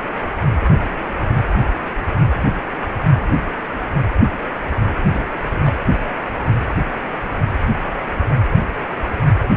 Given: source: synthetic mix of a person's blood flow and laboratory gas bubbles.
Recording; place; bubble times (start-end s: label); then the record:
Doppler ultrasound of blood flow; precordium
5.13-5.29 s: bubbles
5.50-5.72 s: bubbles
From the record:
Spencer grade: 1 (occasional bubble signal discernible with the cardiac motion signal, with majority of cardiac periods free of bubbles); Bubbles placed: anywhere in the cardiac cycle